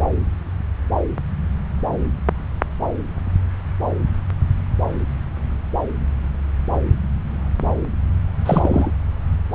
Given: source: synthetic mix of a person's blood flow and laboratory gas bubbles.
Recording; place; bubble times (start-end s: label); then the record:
Doppler ultrasound of blood flow; subclavian vein
8.46-8.92 s: bubbles
From the record:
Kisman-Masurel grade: 212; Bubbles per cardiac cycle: several, 3 to 8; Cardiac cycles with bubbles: 1 to 10%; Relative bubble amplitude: moderate (0.250 to 0.450); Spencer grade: 1 (occasional bubble signal discernible with the cardiac motion signal, with majority of cardiac periods free of bubbles); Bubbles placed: anywhere in the cardiac cycle